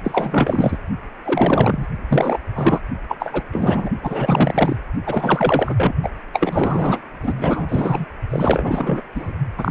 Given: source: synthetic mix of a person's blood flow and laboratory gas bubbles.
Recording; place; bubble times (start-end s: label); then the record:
Doppler ultrasound of blood flow; precordium
0.04-0.78 s: bubbles
1.24-1.86 s: bubbles
2.08-2.38 s: bubbles
2.55-2.80 s: bubbles
3.08-3.17 s: bubbles
3.19-3.43 s: bubbles
3.52-3.90 s: bubbles
4.02-4.76 s: bubbles
5.06-5.93 s: bubbles
6.03-6.10 s: bubbles
6.33-7.04 s: bubbles
7.23-7.34 s: bubbles
7.38-8.05 s: bubbles
8.30-9.01 s: bubbles
9.15-9.33 s: bubbles
9.57-9.71 s: bubbles
From the record:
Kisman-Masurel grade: 444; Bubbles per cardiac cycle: continuous sound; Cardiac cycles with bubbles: 100%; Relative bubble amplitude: maximal (0.775 to 0.999); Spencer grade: 4 (maximum detectable bubble signal sounding continuously throughout systole and diastole of every cardiac period, and overriding the amplitude of the normal cardiac signals); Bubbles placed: only in the low amplitude regions of the cardiac cycle